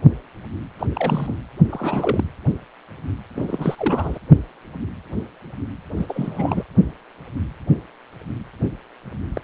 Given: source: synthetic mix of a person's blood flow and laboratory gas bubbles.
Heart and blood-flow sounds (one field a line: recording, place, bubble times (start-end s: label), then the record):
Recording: Doppler ultrasound of blood flow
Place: precordium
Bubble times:
0.79-0.87 s: bubbles
0.95-1.42 s: bubbles
1.70-2.24 s: bubbles
3.34-4.18 s: bubbles
5.96-6.06 s: bubbles
6.08-6.63 s: bubbles
9.34-9.42 s: bubbles
From the record:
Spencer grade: 2 (many but less than half of the cardiac periods contain bubble signals, singularly or in groups)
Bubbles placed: anywhere in the cardiac cycle